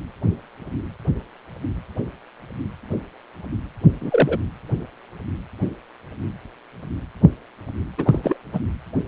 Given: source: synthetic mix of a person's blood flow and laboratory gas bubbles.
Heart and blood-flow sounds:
Doppler ultrasound of blood flow; precordium
4.00-4.39 s: bubbles
7.98-8.20 s: bubbles
8.22-8.37 s: bubbles
8.53-8.60 s: bubbles
From the record:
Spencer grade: 2 (many but less than half of the cardiac periods contain bubble signals, singularly or in groups); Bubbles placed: anywhere in the cardiac cycle

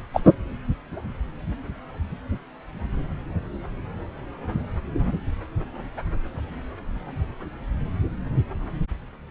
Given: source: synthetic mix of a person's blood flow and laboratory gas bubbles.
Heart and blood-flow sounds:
Doppler ultrasound of blood flow; subclavian vein
0.13-0.20 s: bubbles
0.24-0.33 s: bubbles
From the record:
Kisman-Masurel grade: 123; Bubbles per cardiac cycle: 1 to 2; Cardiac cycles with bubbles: 10 to 50%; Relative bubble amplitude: loud (0.450 to 0.775); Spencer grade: 2 (many but less than half of the cardiac periods contain bubble signals, singularly or in groups); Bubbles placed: anywhere in the cardiac cycle

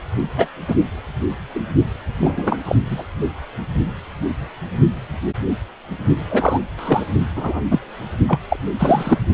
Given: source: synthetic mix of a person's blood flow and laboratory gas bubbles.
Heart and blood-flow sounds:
Doppler ultrasound of blood flow; precordium
0.36-0.47 s: bubbles
0.68-0.75 s: bubbles
1.54-1.60 s: bubbles
2.21-2.57 s: bubbles
2.65-2.75 s: bubbles
2.90-3.03 s: bubbles
6.30-6.59 s: bubbles
6.77-7.06 s: bubbles
7.35-7.62 s: bubbles
7.71-7.79 s: bubbles
8.28-8.39 s: bubbles
8.49-8.57 s: bubbles
8.79-9.19 s: bubbles
From the record:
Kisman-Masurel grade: 233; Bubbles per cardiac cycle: several, 3 to 8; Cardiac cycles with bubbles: 50 to 99%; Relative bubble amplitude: loud (0.450 to 0.775); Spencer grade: 3 (all of the cardiac periods contain showers or single bubble signals, but not dominating or overriding the cardiac motion signals); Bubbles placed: only in the low amplitude regions of the cardiac cycle

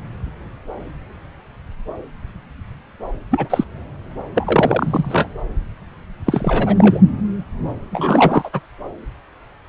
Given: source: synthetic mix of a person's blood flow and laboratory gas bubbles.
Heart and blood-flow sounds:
Doppler ultrasound of blood flow; subclavian vein
3.30-3.64 s: bubbles
4.34-5.28 s: bubbles
6.25-7.02 s: bubbles
7.91-8.50 s: bubbles
8.53-8.61 s: bubbles
From the record:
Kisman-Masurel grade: 223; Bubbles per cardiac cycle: several, 3 to 8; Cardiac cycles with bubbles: 10 to 50%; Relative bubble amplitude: loud (0.450 to 0.775); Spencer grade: 2 (many but less than half of the cardiac periods contain bubble signals, singularly or in groups); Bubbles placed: anywhere in the cardiac cycle

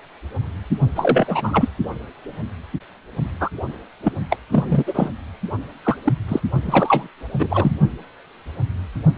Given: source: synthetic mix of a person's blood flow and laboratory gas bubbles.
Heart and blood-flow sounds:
Doppler ultrasound of blood flow; precordium
0.95-1.69 s: bubbles
3.40-3.50 s: bubbles
4.03-4.12 s: bubbles
4.29-4.37 s: bubbles
4.51-5.10 s: bubbles
5.83-5.96 s: bubbles
6.04-6.13 s: bubbles
6.28-6.40 s: bubbles
6.63-7.08 s: bubbles
7.38-7.72 s: bubbles
From the record:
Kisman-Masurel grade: 233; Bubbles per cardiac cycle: several, 3 to 8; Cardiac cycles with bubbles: 50 to 99%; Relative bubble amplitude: loud (0.450 to 0.775); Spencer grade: 3 (all of the cardiac periods contain showers or single bubble signals, but not dominating or overriding the cardiac motion signals); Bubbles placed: only in the low amplitude regions of the cardiac cycle

